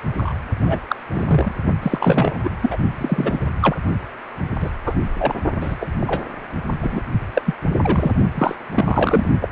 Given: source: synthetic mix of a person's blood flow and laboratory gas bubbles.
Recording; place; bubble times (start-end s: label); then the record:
Doppler ultrasound of blood flow; precordium
0.17-0.33 s: bubbles
0.65-0.79 s: bubbles
0.89-0.95 s: bubbles
1.14-1.52 s: bubbles
1.82-2.40 s: bubbles
2.44-2.51 s: bubbles
2.62-2.77 s: bubbles
2.98-3.48 s: bubbles
3.61-3.76 s: bubbles
4.59-4.70 s: bubbles
4.85-4.95 s: bubbles
5.19-5.33 s: bubbles
5.60-5.77 s: bubbles
5.81-5.85 s: bubbles
6.00-6.21 s: bubbles
6.80-7.01 s: bubbles
7.34-7.42 s: bubbles
7.46-7.54 s: bubbles
7.78-8.12 s: bubbles
8.34-8.55 s: bubbles
8.71-9.26 s: bubbles
9.41-9.49 s: bubbles
From the record:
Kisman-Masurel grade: 243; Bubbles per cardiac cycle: several, 3 to 8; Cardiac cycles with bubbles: 100%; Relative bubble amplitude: loud (0.450 to 0.775); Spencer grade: 3 (all of the cardiac periods contain showers or single bubble signals, but not dominating or overriding the cardiac motion signals); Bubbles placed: only in the low amplitude regions of the cardiac cycle